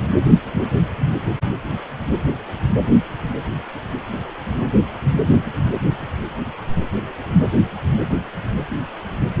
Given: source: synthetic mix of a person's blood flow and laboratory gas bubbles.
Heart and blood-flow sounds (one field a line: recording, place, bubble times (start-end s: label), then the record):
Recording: Doppler ultrasound of blood flow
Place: precordium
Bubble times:
no bubbles
From the record:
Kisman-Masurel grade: 000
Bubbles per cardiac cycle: 0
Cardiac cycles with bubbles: 0%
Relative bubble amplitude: no bubbles discernible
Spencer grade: 0 (complete lack of bubble signals)